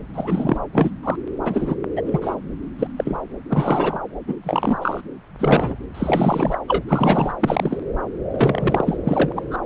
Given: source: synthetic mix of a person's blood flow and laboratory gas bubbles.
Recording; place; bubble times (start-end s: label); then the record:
Doppler ultrasound of blood flow; subclavian vein
0.14-0.58 s: bubbles
0.73-0.91 s: bubbles
1.03-1.16 s: bubbles
1.43-1.75 s: bubbles
1.96-2.02 s: bubbles
2.05-2.35 s: bubbles
2.79-2.87 s: bubbles
2.98-3.21 s: bubbles
3.50-4.00 s: bubbles
4.28-4.34 s: bubbles
4.43-4.78 s: bubbles
4.81-5.01 s: bubbles
5.38-5.75 s: bubbles
5.94-6.56 s: bubbles
6.67-6.83 s: bubbles
6.87-7.33 s: bubbles
7.39-7.78 s: bubbles
8.31-8.97 s: bubbles
9.04-9.57 s: bubbles
From the record:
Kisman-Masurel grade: 243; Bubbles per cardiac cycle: several, 3 to 8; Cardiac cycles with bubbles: 100%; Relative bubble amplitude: loud (0.450 to 0.775); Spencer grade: 3 (all of the cardiac periods contain showers or single bubble signals, but not dominating or overriding the cardiac motion signals); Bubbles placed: anywhere in the cardiac cycle